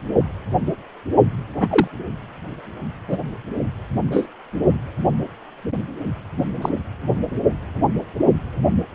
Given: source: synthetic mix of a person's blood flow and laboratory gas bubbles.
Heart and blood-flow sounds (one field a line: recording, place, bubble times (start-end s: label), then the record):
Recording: Doppler ultrasound of blood flow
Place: precordium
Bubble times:
1.60-1.88 s: bubbles
3.07-3.18 s: bubbles
4.11-4.27 s: bubbles
6.37-6.44 s: bubbles
6.62-6.70 s: bubbles
From the record:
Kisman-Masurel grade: 123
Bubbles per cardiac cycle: 1 to 2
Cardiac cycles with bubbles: 10 to 50%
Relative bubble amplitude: loud (0.450 to 0.775)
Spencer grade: 2 (many but less than half of the cardiac periods contain bubble signals, singularly or in groups)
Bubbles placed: only in the low amplitude regions of the cardiac cycle